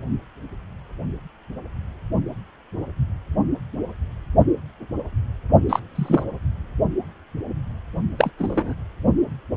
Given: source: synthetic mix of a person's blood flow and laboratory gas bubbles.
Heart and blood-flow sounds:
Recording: Doppler ultrasound of blood flow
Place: precordium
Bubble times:
5.69-5.79 s: bubbles
5.95-6.24 s: bubbles
8.18-8.30 s: bubbles
8.38-8.74 s: bubbles
From the record:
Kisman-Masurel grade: 123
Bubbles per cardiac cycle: 1 to 2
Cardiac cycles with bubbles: 10 to 50%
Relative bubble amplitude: loud (0.450 to 0.775)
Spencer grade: 2 (many but less than half of the cardiac periods contain bubble signals, singularly or in groups)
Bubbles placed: only in the low amplitude regions of the cardiac cycle

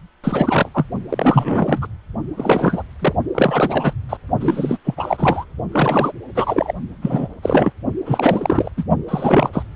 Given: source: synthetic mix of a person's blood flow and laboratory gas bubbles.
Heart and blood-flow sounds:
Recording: Doppler ultrasound of blood flow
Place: precordium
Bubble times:
0.24-0.69 s: bubbles
0.74-0.85 s: bubbles
1.09-1.87 s: bubbles
2.37-2.83 s: bubbles
3.00-3.13 s: bubbles
3.35-3.93 s: bubbles
4.09-4.17 s: bubbles
4.39-4.78 s: bubbles
4.85-4.95 s: bubbles
4.97-5.45 s: bubbles
5.72-6.12 s: bubbles
6.35-6.73 s: bubbles
7.02-7.28 s: bubbles
7.43-7.73 s: bubbles
8.05-8.70 s: bubbles
8.77-8.85 s: bubbles
9.08-9.50 s: bubbles
9.53-9.63 s: bubbles
From the record:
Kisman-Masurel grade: 343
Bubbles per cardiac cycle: rolling drumbeat, 9 or more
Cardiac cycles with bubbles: 100%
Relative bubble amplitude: loud (0.450 to 0.775)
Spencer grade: 3 (all of the cardiac periods contain showers or single bubble signals, but not dominating or overriding the cardiac motion signals)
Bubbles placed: only in the low amplitude regions of the cardiac cycle

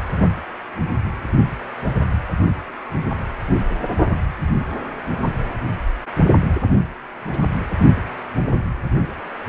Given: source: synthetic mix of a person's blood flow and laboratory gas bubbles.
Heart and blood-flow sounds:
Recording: Doppler ultrasound of blood flow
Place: precordium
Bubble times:
7.26-7.39 s: bubbles
From the record:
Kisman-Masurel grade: 121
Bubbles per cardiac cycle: 1 to 2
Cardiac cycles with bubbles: 10 to 50%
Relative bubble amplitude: barely perceptible (0.100 to 0.250)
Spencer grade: 2 (many but less than half of the cardiac periods contain bubble signals, singularly or in groups)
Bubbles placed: anywhere in the cardiac cycle

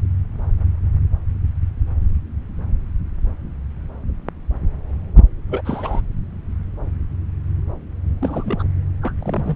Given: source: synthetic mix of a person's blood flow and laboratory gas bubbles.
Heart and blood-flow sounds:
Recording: Doppler ultrasound of blood flow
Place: subclavian vein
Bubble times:
5.49-5.62 s: bubbles
5.64-6.01 s: bubbles
8.21-8.63 s: bubbles
9.02-9.14 s: bubbles
9.19-9.56 s: bubbles
From the record:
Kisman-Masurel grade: 221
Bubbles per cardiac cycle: several, 3 to 8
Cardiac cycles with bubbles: 10 to 50%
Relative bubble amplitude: barely perceptible (0.100 to 0.250)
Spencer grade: 2 (many but less than half of the cardiac periods contain bubble signals, singularly or in groups)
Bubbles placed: anywhere in the cardiac cycle

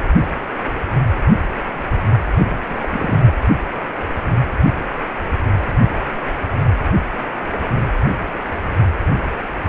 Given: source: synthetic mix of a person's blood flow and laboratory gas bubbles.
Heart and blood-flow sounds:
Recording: Doppler ultrasound of blood flow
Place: precordium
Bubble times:
2.36-2.55 s: bubbles
2.69-3.36 s: bubbles
From the record:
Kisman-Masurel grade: 211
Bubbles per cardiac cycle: several, 3 to 8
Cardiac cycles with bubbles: 1 to 10%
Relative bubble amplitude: barely perceptible (0.100 to 0.250)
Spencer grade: 1 (occasional bubble signal discernible with the cardiac motion signal, with majority of cardiac periods free of bubbles)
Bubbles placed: anywhere in the cardiac cycle

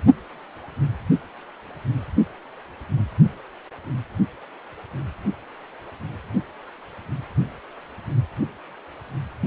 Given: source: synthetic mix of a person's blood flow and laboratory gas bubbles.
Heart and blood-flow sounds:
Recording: Doppler ultrasound of blood flow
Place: precordium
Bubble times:
no bubbles
From the record:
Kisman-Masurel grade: 000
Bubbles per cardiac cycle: 0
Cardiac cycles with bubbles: 0%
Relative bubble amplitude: no bubbles discernible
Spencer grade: 0 (complete lack of bubble signals)

